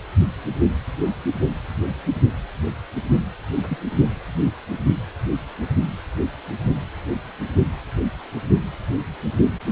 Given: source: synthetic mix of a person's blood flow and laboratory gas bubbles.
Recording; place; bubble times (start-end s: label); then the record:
Doppler ultrasound of blood flow; precordium
3.67-3.77 s: bubbles
From the record:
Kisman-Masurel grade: 111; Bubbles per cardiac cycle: 1 to 2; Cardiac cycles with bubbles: 1 to 10%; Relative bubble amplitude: barely perceptible (0.100 to 0.250); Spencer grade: 1 (occasional bubble signal discernible with the cardiac motion signal, with majority of cardiac periods free of bubbles); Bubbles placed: only in the low amplitude regions of the cardiac cycle